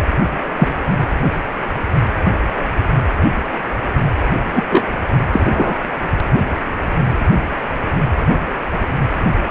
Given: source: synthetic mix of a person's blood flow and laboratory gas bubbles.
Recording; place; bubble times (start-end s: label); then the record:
Doppler ultrasound of blood flow; precordium
0.56-0.68 s: bubbles
4.55-4.62 s: bubbles
4.70-4.85 s: bubbles
5.32-5.79 s: bubbles
From the record:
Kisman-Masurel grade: 123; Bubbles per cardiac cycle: 1 to 2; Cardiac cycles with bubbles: 10 to 50%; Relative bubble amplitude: loud (0.450 to 0.775); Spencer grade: 2 (many but less than half of the cardiac periods contain bubble signals, singularly or in groups); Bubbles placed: anywhere in the cardiac cycle